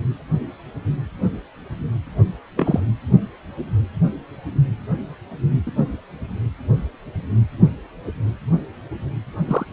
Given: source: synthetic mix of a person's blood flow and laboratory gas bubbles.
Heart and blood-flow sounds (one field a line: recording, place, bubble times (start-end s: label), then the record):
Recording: Doppler ultrasound of blood flow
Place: precordium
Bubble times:
2.56-2.80 s: bubbles
5.66-5.72 s: bubbles
5.76-5.84 s: bubbles
9.47-9.65 s: bubbles
From the record:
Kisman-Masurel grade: 122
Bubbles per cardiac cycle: 1 to 2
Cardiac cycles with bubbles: 10 to 50%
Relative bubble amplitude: moderate (0.250 to 0.450)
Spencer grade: 2 (many but less than half of the cardiac periods contain bubble signals, singularly or in groups)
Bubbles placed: only in the low amplitude regions of the cardiac cycle